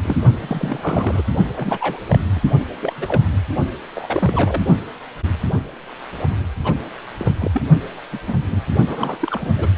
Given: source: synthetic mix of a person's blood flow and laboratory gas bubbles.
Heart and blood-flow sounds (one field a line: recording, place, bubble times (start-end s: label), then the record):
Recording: Doppler ultrasound of blood flow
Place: precordium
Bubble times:
0.00-0.17 s: bubbles
0.41-1.23 s: bubbles
1.56-2.01 s: bubbles
2.08-2.19 s: bubbles
2.35-2.40 s: bubbles
2.79-2.93 s: bubbles
2.97-3.22 s: bubbles
3.96-4.63 s: bubbles
6.63-6.74 s: bubbles
7.17-7.32 s: bubbles
7.39-7.62 s: bubbles
8.12-8.19 s: bubbles
8.27-8.37 s: bubbles
8.50-8.62 s: bubbles
8.87-9.54 s: bubbles
9.57-9.69 s: bubbles
From the record:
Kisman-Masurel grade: 232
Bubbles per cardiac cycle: several, 3 to 8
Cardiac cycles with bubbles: 50 to 99%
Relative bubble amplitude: moderate (0.250 to 0.450)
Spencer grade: 3 (all of the cardiac periods contain showers or single bubble signals, but not dominating or overriding the cardiac motion signals)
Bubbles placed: only in the low amplitude regions of the cardiac cycle